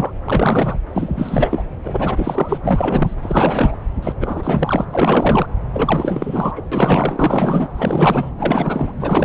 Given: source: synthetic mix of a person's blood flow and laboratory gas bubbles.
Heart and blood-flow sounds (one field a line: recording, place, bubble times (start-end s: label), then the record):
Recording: Doppler ultrasound of blood flow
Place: subclavian vein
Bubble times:
0.00-0.11 s: bubbles
0.25-0.78 s: bubbles
0.93-1.63 s: bubbles
1.84-2.61 s: bubbles
2.63-3.15 s: bubbles
3.21-3.76 s: bubbles
4.02-4.14 s: bubbles
4.20-4.85 s: bubbles
4.90-5.47 s: bubbles
5.73-6.62 s: bubbles
6.72-7.68 s: bubbles
7.74-8.31 s: bubbles
8.38-8.92 s: bubbles
8.99-9.24 s: bubbles
From the record:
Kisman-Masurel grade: 444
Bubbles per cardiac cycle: continuous sound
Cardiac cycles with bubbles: 100%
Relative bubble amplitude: maximal (0.775 to 0.999)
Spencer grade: 4 (maximum detectable bubble signal sounding continuously throughout systole and diastole of every cardiac period, and overriding the amplitude of the normal cardiac signals)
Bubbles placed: anywhere in the cardiac cycle